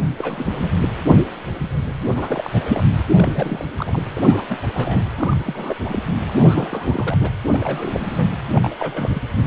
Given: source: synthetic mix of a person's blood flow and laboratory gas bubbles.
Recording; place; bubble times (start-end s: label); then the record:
Doppler ultrasound of blood flow; precordium
0.17-0.69 s: bubbles
2.15-2.85 s: bubbles
3.12-3.65 s: bubbles
3.78-4.01 s: bubbles
4.15-4.42 s: bubbles
4.49-4.58 s: bubbles
4.62-4.70 s: bubbles
4.74-5.03 s: bubbles
5.16-5.75 s: bubbles
5.79-5.99 s: bubbles
6.27-7.17 s: bubbles
7.20-7.29 s: bubbles
7.47-8.26 s: bubbles
8.55-9.21 s: bubbles
From the record:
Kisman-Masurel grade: 332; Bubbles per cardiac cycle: rolling drumbeat, 9 or more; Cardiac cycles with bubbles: 50 to 99%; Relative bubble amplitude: moderate (0.250 to 0.450); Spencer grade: 3 (all of the cardiac periods contain showers or single bubble signals, but not dominating or overriding the cardiac motion signals); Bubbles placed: anywhere in the cardiac cycle